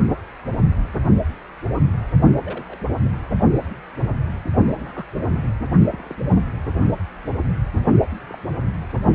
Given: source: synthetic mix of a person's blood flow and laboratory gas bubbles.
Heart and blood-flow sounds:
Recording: Doppler ultrasound of blood flow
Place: precordium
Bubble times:
0.04-0.20 s: bubbles
2.44-2.77 s: bubbles
4.75-5.05 s: bubbles
5.91-6.14 s: bubbles
8.27-8.38 s: bubbles
From the record:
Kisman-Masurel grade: 121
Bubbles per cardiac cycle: 1 to 2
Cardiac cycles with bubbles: 10 to 50%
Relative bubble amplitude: barely perceptible (0.100 to 0.250)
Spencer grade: 2 (many but less than half of the cardiac periods contain bubble signals, singularly or in groups)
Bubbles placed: only in the low amplitude regions of the cardiac cycle

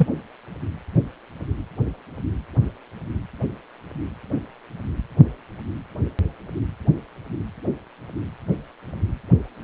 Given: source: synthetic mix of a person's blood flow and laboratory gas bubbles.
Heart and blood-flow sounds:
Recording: Doppler ultrasound of blood flow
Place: precordium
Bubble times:
0.00-0.07 s: bubbles
From the record:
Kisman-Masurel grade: 113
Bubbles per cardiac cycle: 1 to 2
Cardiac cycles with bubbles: 1 to 10%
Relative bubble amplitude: loud (0.450 to 0.775)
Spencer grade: 1 (occasional bubble signal discernible with the cardiac motion signal, with majority of cardiac periods free of bubbles)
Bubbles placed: anywhere in the cardiac cycle

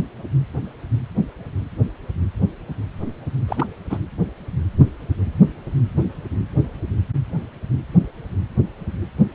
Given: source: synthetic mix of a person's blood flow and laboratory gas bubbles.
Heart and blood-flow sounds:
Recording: Doppler ultrasound of blood flow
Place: precordium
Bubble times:
3.47-3.67 s: bubbles
3.90-3.98 s: bubbles
From the record:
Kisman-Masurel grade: 212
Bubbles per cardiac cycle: several, 3 to 8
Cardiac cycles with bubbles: 1 to 10%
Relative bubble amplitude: moderate (0.250 to 0.450)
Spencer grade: 1 (occasional bubble signal discernible with the cardiac motion signal, with majority of cardiac periods free of bubbles)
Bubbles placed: anywhere in the cardiac cycle

